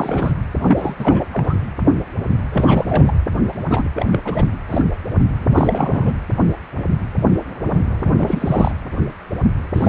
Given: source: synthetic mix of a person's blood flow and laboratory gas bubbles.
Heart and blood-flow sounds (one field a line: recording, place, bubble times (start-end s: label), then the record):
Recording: Doppler ultrasound of blood flow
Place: precordium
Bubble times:
0.00-0.32 s: bubbles
0.61-0.95 s: bubbles
0.99-1.24 s: bubbles
1.33-1.54 s: bubbles
2.52-3.14 s: bubbles
3.69-3.83 s: bubbles
3.94-4.06 s: bubbles
4.11-4.18 s: bubbles
4.25-4.44 s: bubbles
4.69-4.82 s: bubbles
5.50-6.15 s: bubbles
8.04-8.13 s: bubbles
8.18-8.71 s: bubbles
9.74-9.89 s: bubbles
From the record:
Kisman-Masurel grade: 332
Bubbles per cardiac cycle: rolling drumbeat, 9 or more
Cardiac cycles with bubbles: 50 to 99%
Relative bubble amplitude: moderate (0.250 to 0.450)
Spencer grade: 3 (all of the cardiac periods contain showers or single bubble signals, but not dominating or overriding the cardiac motion signals)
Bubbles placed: anywhere in the cardiac cycle